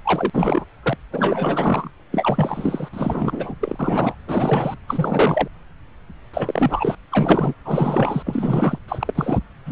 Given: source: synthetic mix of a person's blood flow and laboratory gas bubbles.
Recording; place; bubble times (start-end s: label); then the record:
Doppler ultrasound of blood flow; subclavian vein
0.04-0.30 s: bubbles
0.33-0.65 s: bubbles
0.82-0.97 s: bubbles
1.11-1.91 s: bubbles
2.11-2.89 s: bubbles
2.93-3.54 s: bubbles
3.60-4.15 s: bubbles
4.26-4.74 s: bubbles
4.88-5.48 s: bubbles
6.33-6.95 s: bubbles
7.12-7.54 s: bubbles
7.65-8.22 s: bubbles
8.26-8.79 s: bubbles
8.88-9.39 s: bubbles
9.64-9.72 s: bubbles
From the record:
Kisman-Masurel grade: 333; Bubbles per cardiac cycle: rolling drumbeat, 9 or more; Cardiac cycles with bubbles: 50 to 99%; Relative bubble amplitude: loud (0.450 to 0.775); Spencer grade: 3 (all of the cardiac periods contain showers or single bubble signals, but not dominating or overriding the cardiac motion signals); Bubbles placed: anywhere in the cardiac cycle